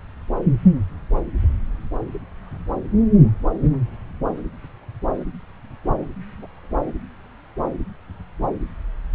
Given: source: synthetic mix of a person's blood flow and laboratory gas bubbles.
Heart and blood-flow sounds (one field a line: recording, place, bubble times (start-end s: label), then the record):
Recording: Doppler ultrasound of blood flow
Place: subclavian vein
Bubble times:
6.38-6.46 s: bubbles
From the record:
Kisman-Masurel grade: 111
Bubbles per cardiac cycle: 1 to 2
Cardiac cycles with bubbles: 1 to 10%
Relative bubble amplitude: barely perceptible (0.100 to 0.250)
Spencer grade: 1 (occasional bubble signal discernible with the cardiac motion signal, with majority of cardiac periods free of bubbles)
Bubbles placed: anywhere in the cardiac cycle